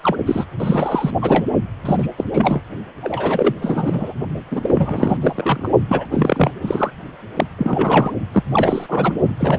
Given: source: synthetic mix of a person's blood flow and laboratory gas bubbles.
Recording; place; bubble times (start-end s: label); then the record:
Doppler ultrasound of blood flow; precordium
0.01-0.16 s: bubbles
0.26-0.44 s: bubbles
0.60-1.10 s: bubbles
1.21-1.45 s: bubbles
1.85-2.06 s: bubbles
2.17-2.24 s: bubbles
2.33-2.60 s: bubbles
3.01-3.53 s: bubbles
3.61-4.14 s: bubbles
4.50-5.18 s: bubbles
5.22-5.69 s: bubbles
5.89-6.06 s: bubbles
6.11-6.52 s: bubbles
6.62-6.91 s: bubbles
7.36-7.46 s: bubbles
7.57-8.12 s: bubbles
8.32-8.43 s: bubbles
8.51-9.12 s: bubbles
9.38-9.59 s: bubbles
From the record:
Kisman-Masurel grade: 342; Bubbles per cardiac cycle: rolling drumbeat, 9 or more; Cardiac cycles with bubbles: 100%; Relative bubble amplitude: moderate (0.250 to 0.450); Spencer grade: 3 (all of the cardiac periods contain showers or single bubble signals, but not dominating or overriding the cardiac motion signals); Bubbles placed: only in the low amplitude regions of the cardiac cycle